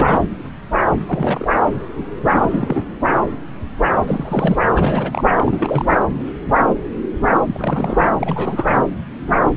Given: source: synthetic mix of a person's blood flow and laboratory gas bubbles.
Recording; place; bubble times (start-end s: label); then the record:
Doppler ultrasound of blood flow; subclavian vein
0.00-0.27 s: bubbles
0.92-0.96 s: bubbles
1.06-1.45 s: bubbles
2.31-2.83 s: bubbles
4.06-4.58 s: bubbles
4.75-5.25 s: bubbles
5.35-6.04 s: bubbles
7.46-8.06 s: bubbles
8.18-8.80 s: bubbles
From the record:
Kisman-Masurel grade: 332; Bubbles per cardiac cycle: rolling drumbeat, 9 or more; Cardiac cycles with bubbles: 50 to 99%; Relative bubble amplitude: moderate (0.250 to 0.450); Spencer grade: 3 (all of the cardiac periods contain showers or single bubble signals, but not dominating or overriding the cardiac motion signals); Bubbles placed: anywhere in the cardiac cycle